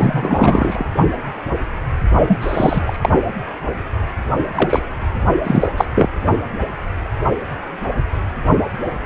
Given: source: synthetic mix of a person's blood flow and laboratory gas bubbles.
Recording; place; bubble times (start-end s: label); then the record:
Doppler ultrasound of blood flow; precordium
0.00-0.85 s: bubbles
2.27-2.38 s: bubbles
2.41-3.10 s: bubbles
4.55-4.83 s: bubbles
5.44-5.67 s: bubbles
5.76-5.85 s: bubbles
5.95-6.09 s: bubbles
From the record:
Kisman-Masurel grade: 223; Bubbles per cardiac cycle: several, 3 to 8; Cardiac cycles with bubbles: 10 to 50%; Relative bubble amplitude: loud (0.450 to 0.775); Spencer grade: 2 (many but less than half of the cardiac periods contain bubble signals, singularly or in groups); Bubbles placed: only in the low amplitude regions of the cardiac cycle